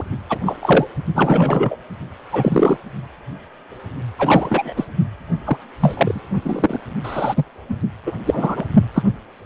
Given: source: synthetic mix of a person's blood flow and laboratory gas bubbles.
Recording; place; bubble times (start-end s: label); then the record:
Doppler ultrasound of blood flow; precordium
0.00-0.04 s: bubbles
0.29-0.39 s: bubbles
0.46-0.56 s: bubbles
0.61-0.87 s: bubbles
1.15-1.76 s: bubbles
2.32-2.78 s: bubbles
4.19-4.73 s: bubbles
4.77-4.85 s: bubbles
5.45-5.58 s: bubbles
5.79-6.20 s: bubbles
6.42-6.81 s: bubbles
7.04-7.44 s: bubbles
7.69-7.75 s: bubbles
8.06-8.12 s: bubbles
8.25-8.64 s: bubbles
8.94-9.02 s: bubbles
From the record:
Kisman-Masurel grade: 233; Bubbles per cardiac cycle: several, 3 to 8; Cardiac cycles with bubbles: 50 to 99%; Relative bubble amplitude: loud (0.450 to 0.775); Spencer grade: 3 (all of the cardiac periods contain showers or single bubble signals, but not dominating or overriding the cardiac motion signals); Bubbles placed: only in the low amplitude regions of the cardiac cycle